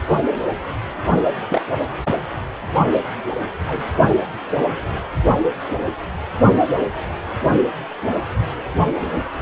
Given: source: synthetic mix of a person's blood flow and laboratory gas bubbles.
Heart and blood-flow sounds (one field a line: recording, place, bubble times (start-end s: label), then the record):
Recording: Doppler ultrasound of blood flow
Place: precordium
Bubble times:
1.49-1.62 s: bubbles
3.67-3.84 s: bubbles
From the record:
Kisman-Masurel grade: 122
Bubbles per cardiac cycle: 1 to 2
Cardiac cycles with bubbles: 10 to 50%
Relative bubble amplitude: moderate (0.250 to 0.450)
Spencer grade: 2 (many but less than half of the cardiac periods contain bubble signals, singularly or in groups)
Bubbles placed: only in the low amplitude regions of the cardiac cycle